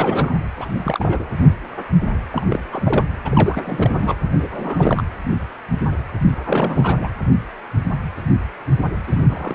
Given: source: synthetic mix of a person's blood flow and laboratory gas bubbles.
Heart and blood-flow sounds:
Doppler ultrasound of blood flow; precordium
0.00-0.38 s: bubbles
0.57-0.69 s: bubbles
0.72-1.32 s: bubbles
2.31-2.46 s: bubbles
2.50-2.64 s: bubbles
2.72-3.06 s: bubbles
3.25-4.14 s: bubbles
4.37-4.47 s: bubbles
4.50-5.03 s: bubbles
6.43-7.09 s: bubbles
9.07-9.54 s: bubbles
From the record:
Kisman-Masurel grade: 332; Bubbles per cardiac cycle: rolling drumbeat, 9 or more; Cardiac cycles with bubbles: 50 to 99%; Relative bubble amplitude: moderate (0.250 to 0.450); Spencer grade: 3 (all of the cardiac periods contain showers or single bubble signals, but not dominating or overriding the cardiac motion signals); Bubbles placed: anywhere in the cardiac cycle

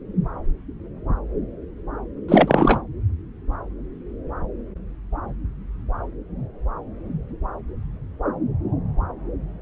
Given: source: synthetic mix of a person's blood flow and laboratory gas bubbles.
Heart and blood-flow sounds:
Doppler ultrasound of blood flow; subclavian vein
2.29-2.80 s: bubbles
From the record:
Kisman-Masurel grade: 213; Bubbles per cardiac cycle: several, 3 to 8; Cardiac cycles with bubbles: 1 to 10%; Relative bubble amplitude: loud (0.450 to 0.775); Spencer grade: 1 (occasional bubble signal discernible with the cardiac motion signal, with majority of cardiac periods free of bubbles); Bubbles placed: anywhere in the cardiac cycle

